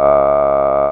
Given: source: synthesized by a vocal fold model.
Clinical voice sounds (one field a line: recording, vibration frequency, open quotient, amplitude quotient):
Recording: sustained vowel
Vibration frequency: 70 Hz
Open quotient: 0.1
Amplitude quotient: 1.1